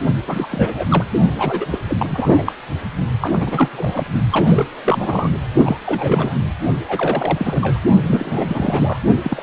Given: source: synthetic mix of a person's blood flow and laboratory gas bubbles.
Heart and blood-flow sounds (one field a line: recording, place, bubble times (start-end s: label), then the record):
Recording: Doppler ultrasound of blood flow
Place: precordium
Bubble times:
0.28-0.46 s: bubbles
0.50-0.86 s: bubbles
0.88-1.04 s: bubbles
1.36-1.67 s: bubbles
1.71-1.79 s: bubbles
1.88-2.52 s: bubbles
3.21-4.05 s: bubbles
4.31-4.66 s: bubbles
4.83-5.30 s: bubbles
5.62-5.77 s: bubbles
5.85-6.37 s: bubbles
6.87-7.78 s: bubbles
8.07-8.98 s: bubbles
9.22-9.43 s: bubbles
From the record:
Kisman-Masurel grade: 342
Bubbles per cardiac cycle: rolling drumbeat, 9 or more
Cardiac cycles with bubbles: 100%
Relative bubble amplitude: moderate (0.250 to 0.450)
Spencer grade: 3 (all of the cardiac periods contain showers or single bubble signals, but not dominating or overriding the cardiac motion signals)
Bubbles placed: only in the low amplitude regions of the cardiac cycle